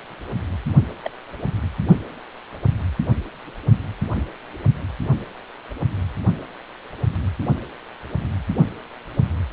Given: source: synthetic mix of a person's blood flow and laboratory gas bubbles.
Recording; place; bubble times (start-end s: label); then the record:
Doppler ultrasound of blood flow; precordium
1.03-1.10 s: bubbles
From the record:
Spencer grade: 2 (many but less than half of the cardiac periods contain bubble signals, singularly or in groups); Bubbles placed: only in the low amplitude regions of the cardiac cycle